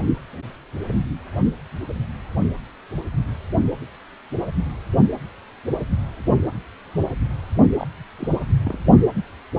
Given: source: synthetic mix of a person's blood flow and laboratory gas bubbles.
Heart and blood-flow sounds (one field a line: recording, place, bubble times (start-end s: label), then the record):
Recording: Doppler ultrasound of blood flow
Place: precordium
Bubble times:
7.80-7.87 s: bubbles
8.18-8.32 s: bubbles
8.65-8.79 s: bubbles
From the record:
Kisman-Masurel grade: 211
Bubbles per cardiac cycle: several, 3 to 8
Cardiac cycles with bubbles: 1 to 10%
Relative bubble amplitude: barely perceptible (0.100 to 0.250)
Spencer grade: 1 (occasional bubble signal discernible with the cardiac motion signal, with majority of cardiac periods free of bubbles)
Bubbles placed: only in the low amplitude regions of the cardiac cycle